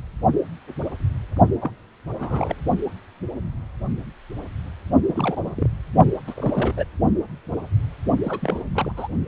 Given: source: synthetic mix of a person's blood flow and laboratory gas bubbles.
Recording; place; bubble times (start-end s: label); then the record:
Doppler ultrasound of blood flow; precordium
1.60-1.71 s: bubbles
2.19-2.55 s: bubbles
5.09-5.71 s: bubbles
6.27-6.74 s: bubbles
6.77-6.85 s: bubbles
8.23-8.63 s: bubbles
8.74-8.92 s: bubbles
8.96-9.07 s: bubbles
From the record:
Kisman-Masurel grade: 232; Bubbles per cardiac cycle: several, 3 to 8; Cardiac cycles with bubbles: 50 to 99%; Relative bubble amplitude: moderate (0.250 to 0.450); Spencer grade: 3 (all of the cardiac periods contain showers or single bubble signals, but not dominating or overriding the cardiac motion signals); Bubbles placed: only in the low amplitude regions of the cardiac cycle